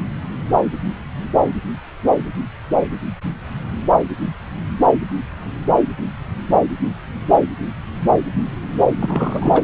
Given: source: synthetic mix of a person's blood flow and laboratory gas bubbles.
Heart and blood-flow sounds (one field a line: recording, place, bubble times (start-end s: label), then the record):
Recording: Doppler ultrasound of blood flow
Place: subclavian vein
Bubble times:
9.00-9.61 s: bubbles
From the record:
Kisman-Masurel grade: 222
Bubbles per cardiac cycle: several, 3 to 8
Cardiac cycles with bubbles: 10 to 50%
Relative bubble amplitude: moderate (0.250 to 0.450)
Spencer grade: 2 (many but less than half of the cardiac periods contain bubble signals, singularly or in groups)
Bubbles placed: anywhere in the cardiac cycle